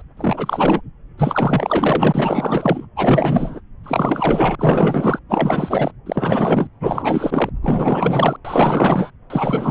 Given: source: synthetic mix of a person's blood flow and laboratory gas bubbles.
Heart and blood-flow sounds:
Doppler ultrasound of blood flow; subclavian vein
0.00-0.02 s: bubbles
0.17-0.81 s: bubbles
1.18-2.86 s: bubbles
2.95-3.60 s: bubbles
3.83-4.55 s: bubbles
4.58-5.19 s: bubbles
5.29-5.91 s: bubbles
6.06-6.67 s: bubbles
6.80-7.50 s: bubbles
7.62-8.37 s: bubbles
8.45-9.11 s: bubbles
9.30-9.71 s: bubbles
From the record:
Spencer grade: 4 (maximum detectable bubble signal sounding continuously throughout systole and diastole of every cardiac period, and overriding the amplitude of the normal cardiac signals); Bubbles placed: anywhere in the cardiac cycle

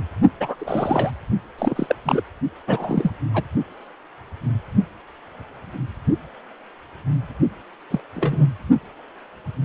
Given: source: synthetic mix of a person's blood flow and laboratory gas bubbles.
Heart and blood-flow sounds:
Doppler ultrasound of blood flow; precordium
0.40-0.56 s: bubbles
0.58-1.11 s: bubbles
1.58-1.95 s: bubbles
2.05-2.23 s: bubbles
2.67-3.12 s: bubbles
3.34-3.44 s: bubbles
7.91-8.00 s: bubbles
8.16-8.46 s: bubbles
From the record:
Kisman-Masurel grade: 222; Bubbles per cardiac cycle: several, 3 to 8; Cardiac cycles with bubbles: 10 to 50%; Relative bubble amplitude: moderate (0.250 to 0.450); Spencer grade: 2 (many but less than half of the cardiac periods contain bubble signals, singularly or in groups); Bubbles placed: only in the low amplitude regions of the cardiac cycle

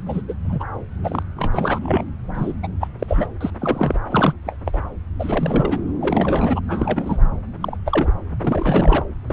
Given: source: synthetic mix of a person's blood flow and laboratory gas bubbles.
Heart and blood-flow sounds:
Doppler ultrasound of blood flow; subclavian vein
0.06-0.22 s: bubbles
0.28-0.34 s: bubbles
0.44-0.64 s: bubbles
1.03-1.23 s: bubbles
1.36-1.78 s: bubbles
1.84-2.04 s: bubbles
2.34-2.53 s: bubbles
2.62-2.67 s: bubbles
2.80-2.88 s: bubbles
2.99-3.26 s: bubbles
3.41-3.50 s: bubbles
3.58-3.95 s: bubbles
4.10-4.33 s: bubbles
4.45-4.57 s: bubbles
4.65-4.79 s: bubbles
5.19-5.86 s: bubbles
6.00-6.60 s: bubbles
6.68-7.28 s: bubbles
7.60-7.77 s: bubbles
7.85-8.12 s: bubbles
8.39-9.04 s: bubbles
9.26-9.33 s: bubbles
From the record:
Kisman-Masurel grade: 242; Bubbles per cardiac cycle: several, 3 to 8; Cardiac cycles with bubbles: 100%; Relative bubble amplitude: moderate (0.250 to 0.450); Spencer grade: 3 (all of the cardiac periods contain showers or single bubble signals, but not dominating or overriding the cardiac motion signals); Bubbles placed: anywhere in the cardiac cycle

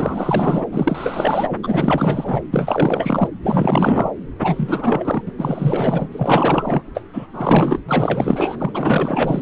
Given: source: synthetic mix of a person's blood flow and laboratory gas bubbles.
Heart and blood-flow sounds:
Doppler ultrasound of blood flow; subclavian vein
0.00-0.66 s: bubbles
0.71-1.56 s: bubbles
1.63-2.42 s: bubbles
2.52-3.28 s: bubbles
3.42-4.12 s: bubbles
4.40-5.22 s: bubbles
5.27-5.33 s: bubbles
5.38-6.07 s: bubbles
6.11-6.82 s: bubbles
6.94-7.03 s: bubbles
7.12-7.28 s: bubbles
7.33-7.81 s: bubbles
7.88-9.42 s: bubbles
From the record:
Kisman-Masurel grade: 444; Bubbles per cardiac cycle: continuous sound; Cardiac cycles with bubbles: 100%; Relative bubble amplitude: maximal (0.775 to 0.999); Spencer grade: 4 (maximum detectable bubble signal sounding continuously throughout systole and diastole of every cardiac period, and overriding the amplitude of the normal cardiac signals); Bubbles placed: anywhere in the cardiac cycle

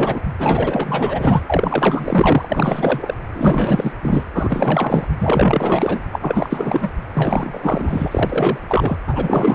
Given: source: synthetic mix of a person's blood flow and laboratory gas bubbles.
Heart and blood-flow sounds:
Doppler ultrasound of blood flow; precordium
0.00-0.22 s: bubbles
0.39-1.42 s: bubbles
1.47-3.14 s: bubbles
3.32-3.93 s: bubbles
4.02-4.24 s: bubbles
4.35-5.07 s: bubbles
5.18-6.03 s: bubbles
6.12-6.93 s: bubbles
7.12-8.58 s: bubbles
8.68-8.98 s: bubbles
9.06-9.55 s: bubbles
From the record:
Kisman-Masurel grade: 444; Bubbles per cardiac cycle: continuous sound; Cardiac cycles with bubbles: 100%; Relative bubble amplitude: maximal (0.775 to 0.999); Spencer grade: 4 (maximum detectable bubble signal sounding continuously throughout systole and diastole of every cardiac period, and overriding the amplitude of the normal cardiac signals); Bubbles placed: anywhere in the cardiac cycle

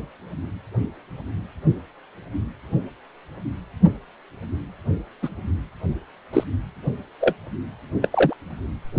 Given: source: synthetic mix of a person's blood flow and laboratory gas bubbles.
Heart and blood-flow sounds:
Doppler ultrasound of blood flow; precordium
5.22-5.29 s: bubbles
6.33-6.44 s: bubbles
7.21-7.33 s: bubbles
8.02-8.33 s: bubbles
From the record:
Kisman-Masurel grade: 123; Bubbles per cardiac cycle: 1 to 2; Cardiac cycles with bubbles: 10 to 50%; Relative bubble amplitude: loud (0.450 to 0.775); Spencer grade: 2 (many but less than half of the cardiac periods contain bubble signals, singularly or in groups); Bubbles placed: anywhere in the cardiac cycle

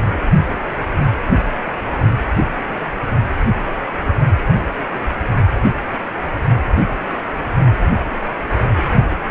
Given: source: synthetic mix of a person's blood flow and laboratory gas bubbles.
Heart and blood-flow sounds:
Doppler ultrasound of blood flow; precordium
no bubbles
From the record:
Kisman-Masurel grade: 000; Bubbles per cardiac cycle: 0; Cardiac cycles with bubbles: 0%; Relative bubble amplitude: no bubbles discernible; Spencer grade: 0 (complete lack of bubble signals)

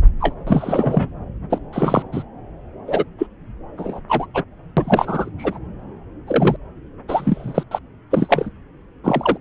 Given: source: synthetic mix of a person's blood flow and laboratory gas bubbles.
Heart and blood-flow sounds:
Doppler ultrasound of blood flow; subclavian vein
0.20-0.34 s: bubbles
0.46-1.10 s: bubbles
1.50-1.59 s: bubbles
1.73-2.02 s: bubbles
2.12-2.23 s: bubbles
2.87-3.04 s: bubbles
3.19-3.27 s: bubbles
3.77-4.00 s: bubbles
4.08-4.26 s: bubbles
4.34-4.43 s: bubbles
4.76-5.30 s: bubbles
5.38-5.58 s: bubbles
6.27-6.57 s: bubbles
7.08-7.63 s: bubbles
7.71-7.79 s: bubbles
8.11-8.50 s: bubbles
9.04-9.38 s: bubbles
From the record:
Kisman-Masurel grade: 243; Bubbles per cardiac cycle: several, 3 to 8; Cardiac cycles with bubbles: 100%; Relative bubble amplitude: loud (0.450 to 0.775); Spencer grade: 3 (all of the cardiac periods contain showers or single bubble signals, but not dominating or overriding the cardiac motion signals); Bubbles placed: anywhere in the cardiac cycle

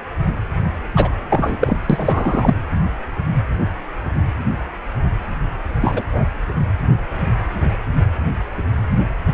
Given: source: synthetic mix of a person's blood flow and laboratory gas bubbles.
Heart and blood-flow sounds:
Doppler ultrasound of blood flow; precordium
0.96-1.10 s: bubbles
1.30-1.57 s: bubbles
1.60-1.78 s: bubbles
1.90-2.54 s: bubbles
5.80-6.04 s: bubbles
6.12-6.25 s: bubbles
From the record:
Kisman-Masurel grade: 223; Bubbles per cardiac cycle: several, 3 to 8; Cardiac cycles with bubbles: 10 to 50%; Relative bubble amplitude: loud (0.450 to 0.775); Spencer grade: 2 (many but less than half of the cardiac periods contain bubble signals, singularly or in groups); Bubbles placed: anywhere in the cardiac cycle

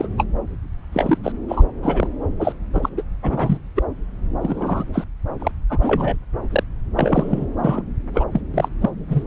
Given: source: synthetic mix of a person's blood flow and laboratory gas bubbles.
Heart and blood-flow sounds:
Doppler ultrasound of blood flow; subclavian vein
0.00-0.09 s: bubbles
0.17-0.25 s: bubbles
0.93-1.18 s: bubbles
1.23-1.32 s: bubbles
1.48-1.65 s: bubbles
1.83-2.08 s: bubbles
2.39-2.52 s: bubbles
2.73-2.89 s: bubbles
2.97-3.02 s: bubbles
3.22-3.58 s: bubbles
3.76-3.83 s: bubbles
4.42-4.84 s: bubbles
4.93-5.04 s: bubbles
5.39-5.52 s: bubbles
5.69-5.78 s: bubbles
5.81-6.16 s: bubbles
6.51-6.63 s: bubbles
6.96-7.46 s: bubbles
7.59-7.82 s: bubbles
8.13-8.25 s: bubbles
8.32-8.41 s: bubbles
8.54-8.69 s: bubbles
8.80-8.90 s: bubbles
9.10-9.25 s: bubbles
From the record:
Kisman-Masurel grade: 242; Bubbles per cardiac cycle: several, 3 to 8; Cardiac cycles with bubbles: 100%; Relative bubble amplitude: moderate (0.250 to 0.450); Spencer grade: 3 (all of the cardiac periods contain showers or single bubble signals, but not dominating or overriding the cardiac motion signals); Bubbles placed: anywhere in the cardiac cycle

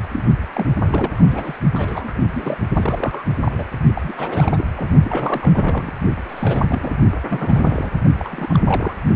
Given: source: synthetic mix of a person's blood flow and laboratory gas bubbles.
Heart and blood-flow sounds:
Doppler ultrasound of blood flow; precordium
0.09-0.25 s: bubbles
0.53-0.66 s: bubbles
0.87-1.11 s: bubbles
1.17-1.58 s: bubbles
1.73-2.22 s: bubbles
2.35-2.58 s: bubbles
2.75-3.23 s: bubbles
3.45-3.64 s: bubbles
3.94-4.64 s: bubbles
4.76-4.90 s: bubbles
5.04-5.90 s: bubbles
6.29-6.99 s: bubbles
7.28-7.91 s: bubbles
8.19-8.94 s: bubbles
From the record:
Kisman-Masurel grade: 342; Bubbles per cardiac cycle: rolling drumbeat, 9 or more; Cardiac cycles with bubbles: 100%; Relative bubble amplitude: moderate (0.250 to 0.450); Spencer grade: 3 (all of the cardiac periods contain showers or single bubble signals, but not dominating or overriding the cardiac motion signals); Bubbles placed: only in the low amplitude regions of the cardiac cycle

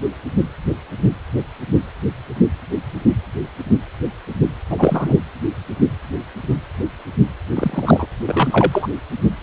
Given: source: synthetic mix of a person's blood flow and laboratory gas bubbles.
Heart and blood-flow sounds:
Doppler ultrasound of blood flow; precordium
4.70-5.15 s: bubbles
7.55-8.07 s: bubbles
8.25-8.88 s: bubbles
From the record:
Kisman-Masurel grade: 223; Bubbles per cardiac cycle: several, 3 to 8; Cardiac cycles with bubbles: 10 to 50%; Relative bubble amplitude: loud (0.450 to 0.775); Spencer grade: 2 (many but less than half of the cardiac periods contain bubble signals, singularly or in groups); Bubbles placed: anywhere in the cardiac cycle

